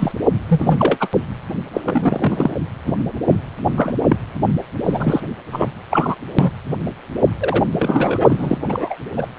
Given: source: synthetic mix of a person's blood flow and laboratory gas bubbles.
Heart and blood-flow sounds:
Doppler ultrasound of blood flow; precordium
0.00-0.12 s: bubbles
0.49-1.08 s: bubbles
1.73-1.81 s: bubbles
1.84-2.55 s: bubbles
2.86-2.94 s: bubbles
3.27-3.35 s: bubbles
3.76-3.96 s: bubbles
4.09-4.16 s: bubbles
4.84-5.21 s: bubbles
5.52-5.71 s: bubbles
5.91-6.16 s: bubbles
6.38-6.51 s: bubbles
7.40-7.64 s: bubbles
7.79-8.58 s: bubbles
8.69-8.96 s: bubbles
9.17-9.27 s: bubbles
From the record:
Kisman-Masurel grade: 243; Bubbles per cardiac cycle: several, 3 to 8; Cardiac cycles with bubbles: 100%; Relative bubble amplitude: loud (0.450 to 0.775); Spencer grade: 3 (all of the cardiac periods contain showers or single bubble signals, but not dominating or overriding the cardiac motion signals); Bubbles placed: anywhere in the cardiac cycle

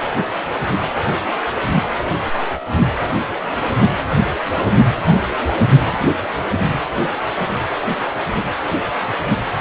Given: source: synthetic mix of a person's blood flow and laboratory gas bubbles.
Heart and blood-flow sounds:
Doppler ultrasound of blood flow; precordium
0.18-0.31 s: bubbles
0.67-0.76 s: bubbles
0.82-0.88 s: bubbles
From the record:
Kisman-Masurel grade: 211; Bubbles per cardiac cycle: several, 3 to 8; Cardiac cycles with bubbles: 1 to 10%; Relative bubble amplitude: barely perceptible (0.100 to 0.250); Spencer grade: 1 (occasional bubble signal discernible with the cardiac motion signal, with majority of cardiac periods free of bubbles); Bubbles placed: anywhere in the cardiac cycle

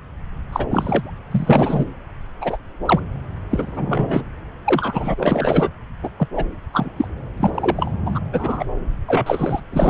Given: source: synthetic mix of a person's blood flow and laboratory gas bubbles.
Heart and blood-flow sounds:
Doppler ultrasound of blood flow; subclavian vein
0.52-0.67 s: bubbles
0.71-1.11 s: bubbles
1.31-1.85 s: bubbles
2.41-2.57 s: bubbles
2.85-3.00 s: bubbles
3.50-4.24 s: bubbles
4.64-5.14 s: bubbles
5.17-5.70 s: bubbles
6.03-6.09 s: bubbles
6.19-6.28 s: bubbles
6.36-6.44 s: bubbles
6.72-6.92 s: bubbles
6.96-7.08 s: bubbles
7.37-7.50 s: bubbles
7.54-7.91 s: bubbles
8.05-8.19 s: bubbles
8.32-8.64 s: bubbles
9.08-9.60 s: bubbles
9.72-9.90 s: bubbles
From the record:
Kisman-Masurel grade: 242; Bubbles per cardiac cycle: several, 3 to 8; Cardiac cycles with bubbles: 100%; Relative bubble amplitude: moderate (0.250 to 0.450); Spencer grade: 3 (all of the cardiac periods contain showers or single bubble signals, but not dominating or overriding the cardiac motion signals); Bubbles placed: anywhere in the cardiac cycle

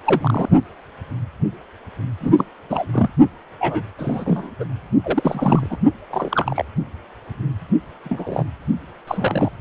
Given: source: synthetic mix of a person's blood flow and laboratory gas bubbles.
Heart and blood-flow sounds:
Doppler ultrasound of blood flow; precordium
0.06-0.49 s: bubbles
2.21-2.33 s: bubbles
2.36-2.45 s: bubbles
2.69-2.86 s: bubbles
2.93-3.10 s: bubbles
3.60-3.83 s: bubbles
3.98-4.50 s: bubbles
4.59-4.64 s: bubbles
5.03-5.78 s: bubbles
6.10-6.65 s: bubbles
8.04-8.44 s: bubbles
9.07-9.52 s: bubbles
From the record:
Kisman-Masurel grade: 232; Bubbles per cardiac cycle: several, 3 to 8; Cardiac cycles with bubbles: 50 to 99%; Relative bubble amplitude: moderate (0.250 to 0.450); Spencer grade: 3 (all of the cardiac periods contain showers or single bubble signals, but not dominating or overriding the cardiac motion signals); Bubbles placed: only in the low amplitude regions of the cardiac cycle

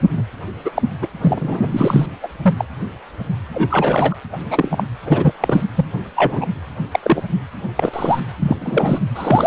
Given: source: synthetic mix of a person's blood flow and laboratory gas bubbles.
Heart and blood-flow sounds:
Doppler ultrasound of blood flow; precordium
0.16-0.23 s: bubbles
0.65-0.70 s: bubbles
0.76-0.82 s: bubbles
1.01-1.07 s: bubbles
1.22-1.69 s: bubbles
1.72-2.06 s: bubbles
2.23-2.28 s: bubbles
2.42-2.54 s: bubbles
2.57-2.65 s: bubbles
3.51-4.16 s: bubbles
4.32-4.38 s: bubbles
4.50-4.83 s: bubbles
5.05-5.33 s: bubbles
5.40-5.61 s: bubbles
5.74-5.85 s: bubbles
6.15-6.46 s: bubbles
6.92-6.99 s: bubbles
7.02-7.23 s: bubbles
7.75-8.20 s: bubbles
8.41-8.56 s: bubbles
8.61-8.99 s: bubbles
9.16-9.47 s: bubbles
From the record:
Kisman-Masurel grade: 233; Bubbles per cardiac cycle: several, 3 to 8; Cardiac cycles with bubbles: 50 to 99%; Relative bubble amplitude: loud (0.450 to 0.775); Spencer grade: 3 (all of the cardiac periods contain showers or single bubble signals, but not dominating or overriding the cardiac motion signals); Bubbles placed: anywhere in the cardiac cycle

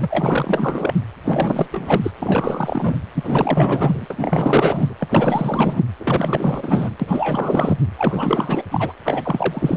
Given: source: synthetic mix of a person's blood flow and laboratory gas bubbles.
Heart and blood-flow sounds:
Doppler ultrasound of blood flow; precordium
0.00-0.93 s: bubbles
1.25-1.68 s: bubbles
1.71-2.11 s: bubbles
2.21-2.96 s: bubbles
3.15-4.07 s: bubbles
4.10-4.94 s: bubbles
5.00-5.83 s: bubbles
6.00-6.96 s: bubbles
7.00-7.79 s: bubbles
7.98-8.63 s: bubbles
8.71-8.93 s: bubbles
9.04-9.77 s: bubbles
From the record:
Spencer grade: 4 (maximum detectable bubble signal sounding continuously throughout systole and diastole of every cardiac period, and overriding the amplitude of the normal cardiac signals); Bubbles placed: anywhere in the cardiac cycle

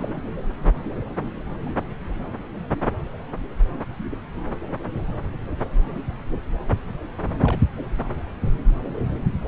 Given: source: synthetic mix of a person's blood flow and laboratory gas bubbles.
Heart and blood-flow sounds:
Doppler ultrasound of blood flow; subclavian vein
0.00-0.20 s: bubbles
7.43-7.60 s: bubbles
From the record:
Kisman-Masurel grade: 111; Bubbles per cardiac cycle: 1 to 2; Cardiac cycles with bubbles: 1 to 10%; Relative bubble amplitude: barely perceptible (0.100 to 0.250); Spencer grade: 1 (occasional bubble signal discernible with the cardiac motion signal, with majority of cardiac periods free of bubbles); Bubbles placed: anywhere in the cardiac cycle

